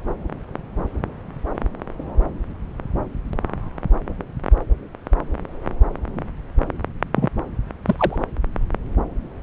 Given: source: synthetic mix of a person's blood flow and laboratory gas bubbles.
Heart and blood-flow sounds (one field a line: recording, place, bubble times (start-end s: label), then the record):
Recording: Doppler ultrasound of blood flow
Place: subclavian vein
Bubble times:
7.15-7.29 s: bubbles
7.86-8.24 s: bubbles
From the record:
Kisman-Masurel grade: 212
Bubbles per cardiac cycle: several, 3 to 8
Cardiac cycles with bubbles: 1 to 10%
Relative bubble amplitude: moderate (0.250 to 0.450)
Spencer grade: 1 (occasional bubble signal discernible with the cardiac motion signal, with majority of cardiac periods free of bubbles)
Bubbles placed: anywhere in the cardiac cycle